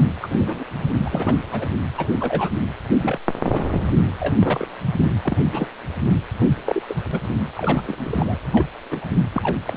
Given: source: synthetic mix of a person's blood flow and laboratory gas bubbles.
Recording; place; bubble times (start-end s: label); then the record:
Doppler ultrasound of blood flow; precordium
0.00-0.08 s: bubbles
0.21-0.64 s: bubbles
0.94-1.35 s: bubbles
1.52-1.68 s: bubbles
1.98-2.13 s: bubbles
2.20-2.50 s: bubbles
3.02-3.19 s: bubbles
3.52-3.65 s: bubbles
4.20-4.35 s: bubbles
4.39-4.67 s: bubbles
5.04-5.15 s: bubbles
5.23-5.40 s: bubbles
5.51-5.67 s: bubbles
6.40-6.47 s: bubbles
6.65-6.83 s: bubbles
6.88-6.96 s: bubbles
7.12-7.20 s: bubbles
7.57-7.83 s: bubbles
7.87-8.38 s: bubbles
8.53-8.67 s: bubbles
8.90-9.06 s: bubbles
9.32-9.54 s: bubbles
9.65-9.77 s: bubbles
From the record:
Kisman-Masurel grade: 242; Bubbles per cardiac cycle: several, 3 to 8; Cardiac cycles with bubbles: 100%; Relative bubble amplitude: moderate (0.250 to 0.450); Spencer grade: 3 (all of the cardiac periods contain showers or single bubble signals, but not dominating or overriding the cardiac motion signals); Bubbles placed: anywhere in the cardiac cycle